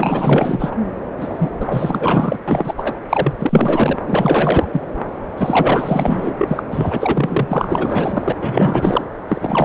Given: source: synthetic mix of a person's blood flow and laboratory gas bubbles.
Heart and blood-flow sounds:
Doppler ultrasound of blood flow; subclavian vein
0.00-0.75 s: bubbles
1.20-1.51 s: bubbles
1.59-2.38 s: bubbles
2.48-2.95 s: bubbles
3.10-3.37 s: bubbles
3.40-3.99 s: bubbles
4.07-4.68 s: bubbles
4.72-4.81 s: bubbles
5.37-6.34 s: bubbles
6.38-6.63 s: bubbles
6.71-7.47 s: bubbles
7.50-9.04 s: bubbles
9.28-9.65 s: bubbles
From the record:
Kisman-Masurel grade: 444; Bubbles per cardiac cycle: continuous sound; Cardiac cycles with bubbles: 100%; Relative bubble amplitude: maximal (0.775 to 0.999); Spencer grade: 4 (maximum detectable bubble signal sounding continuously throughout systole and diastole of every cardiac period, and overriding the amplitude of the normal cardiac signals); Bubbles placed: anywhere in the cardiac cycle

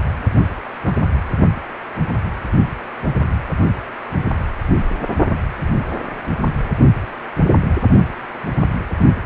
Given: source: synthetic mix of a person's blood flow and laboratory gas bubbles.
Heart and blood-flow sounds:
Doppler ultrasound of blood flow; precordium
0.86-0.92 s: bubbles
From the record:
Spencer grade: 1 (occasional bubble signal discernible with the cardiac motion signal, with majority of cardiac periods free of bubbles); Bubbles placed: only in the low amplitude regions of the cardiac cycle

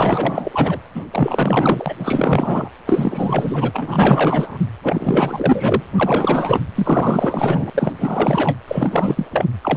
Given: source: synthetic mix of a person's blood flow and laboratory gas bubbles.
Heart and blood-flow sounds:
Doppler ultrasound of blood flow; precordium
0.00-0.80 s: bubbles
0.94-1.05 s: bubbles
1.11-1.95 s: bubbles
1.99-2.70 s: bubbles
2.85-4.58 s: bubbles
4.83-5.85 s: bubbles
5.96-6.61 s: bubbles
6.75-7.70 s: bubbles
7.74-8.58 s: bubbles
8.67-9.26 s: bubbles
9.30-9.45 s: bubbles
9.62-9.77 s: bubbles
From the record:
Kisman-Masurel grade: 444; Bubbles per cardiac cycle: continuous sound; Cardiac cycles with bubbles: 100%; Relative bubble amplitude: maximal (0.775 to 0.999); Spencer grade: 4 (maximum detectable bubble signal sounding continuously throughout systole and diastole of every cardiac period, and overriding the amplitude of the normal cardiac signals); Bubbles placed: anywhere in the cardiac cycle

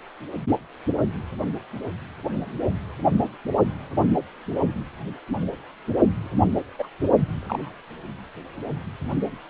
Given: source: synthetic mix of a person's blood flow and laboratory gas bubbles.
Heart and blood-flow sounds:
Doppler ultrasound of blood flow; precordium
6.78-6.88 s: bubbles
7.41-7.70 s: bubbles
From the record:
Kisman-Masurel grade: 122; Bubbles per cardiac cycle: 1 to 2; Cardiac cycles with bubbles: 10 to 50%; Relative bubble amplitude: moderate (0.250 to 0.450); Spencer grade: 2 (many but less than half of the cardiac periods contain bubble signals, singularly or in groups); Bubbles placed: only in the low amplitude regions of the cardiac cycle

